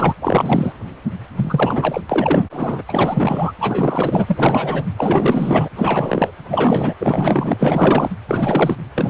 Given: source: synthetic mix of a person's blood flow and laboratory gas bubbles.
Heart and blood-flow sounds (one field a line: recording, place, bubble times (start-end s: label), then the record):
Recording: Doppler ultrasound of blood flow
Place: precordium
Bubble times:
0.00-0.14 s: bubbles
0.20-0.73 s: bubbles
1.35-2.01 s: bubbles
2.09-2.48 s: bubbles
2.52-2.82 s: bubbles
2.88-3.52 s: bubbles
3.60-4.86 s: bubbles
4.97-5.69 s: bubbles
5.76-6.31 s: bubbles
6.48-6.93 s: bubbles
6.98-8.11 s: bubbles
8.29-8.75 s: bubbles
8.95-9.10 s: bubbles
From the record:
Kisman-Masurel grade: 444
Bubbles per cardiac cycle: continuous sound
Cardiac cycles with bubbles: 100%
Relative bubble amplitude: maximal (0.775 to 0.999)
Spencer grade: 4 (maximum detectable bubble signal sounding continuously throughout systole and diastole of every cardiac period, and overriding the amplitude of the normal cardiac signals)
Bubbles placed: anywhere in the cardiac cycle